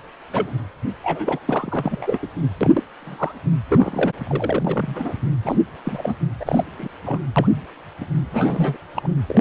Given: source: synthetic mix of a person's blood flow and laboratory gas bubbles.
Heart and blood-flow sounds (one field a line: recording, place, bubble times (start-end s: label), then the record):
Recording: Doppler ultrasound of blood flow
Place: precordium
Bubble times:
0.31-0.54 s: bubbles
1.04-1.39 s: bubbles
1.48-2.19 s: bubbles
2.23-2.27 s: bubbles
2.60-2.83 s: bubbles
2.99-3.35 s: bubbles
3.70-4.12 s: bubbles
4.22-5.13 s: bubbles
5.43-5.57 s: bubbles
5.85-6.16 s: bubbles
6.40-6.64 s: bubbles
6.79-6.88 s: bubbles
7.05-7.19 s: bubbles
7.36-7.62 s: bubbles
8.00-8.05 s: bubbles
8.33-8.77 s: bubbles
8.95-9.13 s: bubbles
9.28-9.41 s: bubbles
From the record:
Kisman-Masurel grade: 242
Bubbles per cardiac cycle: several, 3 to 8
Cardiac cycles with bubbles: 100%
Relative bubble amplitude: moderate (0.250 to 0.450)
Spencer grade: 3 (all of the cardiac periods contain showers or single bubble signals, but not dominating or overriding the cardiac motion signals)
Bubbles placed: anywhere in the cardiac cycle